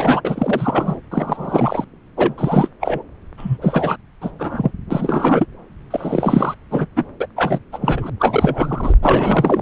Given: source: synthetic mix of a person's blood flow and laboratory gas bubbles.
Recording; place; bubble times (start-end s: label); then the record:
Doppler ultrasound of blood flow; subclavian vein
0.00-0.22 s: bubbles
0.24-1.01 s: bubbles
1.11-1.85 s: bubbles
2.17-2.33 s: bubbles
2.38-2.69 s: bubbles
2.80-3.02 s: bubbles
3.38-3.57 s: bubbles
3.61-3.96 s: bubbles
4.21-4.31 s: bubbles
4.39-4.71 s: bubbles
4.91-5.46 s: bubbles
5.90-6.54 s: bubbles
6.71-6.87 s: bubbles
6.96-7.05 s: bubbles
7.20-7.26 s: bubbles
7.36-7.59 s: bubbles
7.72-8.10 s: bubbles
8.19-8.94 s: bubbles
9.02-9.62 s: bubbles
From the record:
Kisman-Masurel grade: 343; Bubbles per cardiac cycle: rolling drumbeat, 9 or more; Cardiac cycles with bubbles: 100%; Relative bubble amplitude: loud (0.450 to 0.775); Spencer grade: 3 (all of the cardiac periods contain showers or single bubble signals, but not dominating or overriding the cardiac motion signals); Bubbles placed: anywhere in the cardiac cycle